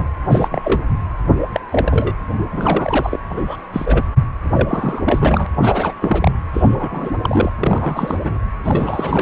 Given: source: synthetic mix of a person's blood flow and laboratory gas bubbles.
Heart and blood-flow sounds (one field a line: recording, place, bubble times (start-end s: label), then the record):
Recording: Doppler ultrasound of blood flow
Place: precordium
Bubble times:
0.00-0.08 s: bubbles
0.28-0.61 s: bubbles
0.64-0.80 s: bubbles
1.52-1.60 s: bubbles
1.71-2.12 s: bubbles
2.50-3.19 s: bubbles
3.29-3.56 s: bubbles
3.73-4.05 s: bubbles
4.54-5.46 s: bubbles
5.62-5.93 s: bubbles
6.02-6.31 s: bubbles
6.54-7.12 s: bubbles
7.21-7.52 s: bubbles
7.58-8.39 s: bubbles
8.64-9.22 s: bubbles
From the record:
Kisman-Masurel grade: 242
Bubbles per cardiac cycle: several, 3 to 8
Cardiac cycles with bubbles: 100%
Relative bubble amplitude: moderate (0.250 to 0.450)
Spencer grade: 3 (all of the cardiac periods contain showers or single bubble signals, but not dominating or overriding the cardiac motion signals)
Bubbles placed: anywhere in the cardiac cycle